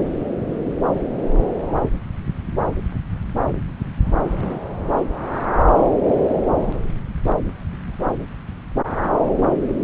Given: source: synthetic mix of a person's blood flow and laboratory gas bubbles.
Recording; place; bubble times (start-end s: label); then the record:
Doppler ultrasound of blood flow; subclavian vein
4.25-4.59 s: bubbles
From the record:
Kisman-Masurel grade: 111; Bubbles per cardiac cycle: 1 to 2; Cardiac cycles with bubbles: 1 to 10%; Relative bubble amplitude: barely perceptible (0.100 to 0.250); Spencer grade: 1 (occasional bubble signal discernible with the cardiac motion signal, with majority of cardiac periods free of bubbles); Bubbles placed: anywhere in the cardiac cycle